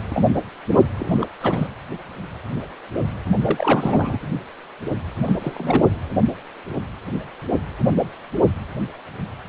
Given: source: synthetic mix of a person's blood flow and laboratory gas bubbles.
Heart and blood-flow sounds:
Doppler ultrasound of blood flow; precordium
0.10-0.33 s: bubbles
0.71-0.80 s: bubbles
0.99-1.27 s: bubbles
1.41-1.70 s: bubbles
3.44-4.18 s: bubbles
5.25-5.37 s: bubbles
5.42-5.89 s: bubbles
From the record:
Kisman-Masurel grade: 222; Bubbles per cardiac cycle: several, 3 to 8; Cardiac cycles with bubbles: 10 to 50%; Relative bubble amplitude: moderate (0.250 to 0.450); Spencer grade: 2 (many but less than half of the cardiac periods contain bubble signals, singularly or in groups); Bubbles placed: anywhere in the cardiac cycle

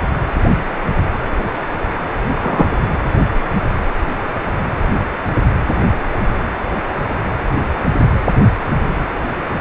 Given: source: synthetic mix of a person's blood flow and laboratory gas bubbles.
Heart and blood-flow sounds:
Doppler ultrasound of blood flow; precordium
2.42-2.67 s: bubbles
From the record:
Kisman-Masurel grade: 113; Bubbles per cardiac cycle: 1 to 2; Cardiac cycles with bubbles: 1 to 10%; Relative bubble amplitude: loud (0.450 to 0.775); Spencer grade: 1 (occasional bubble signal discernible with the cardiac motion signal, with majority of cardiac periods free of bubbles); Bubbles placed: anywhere in the cardiac cycle

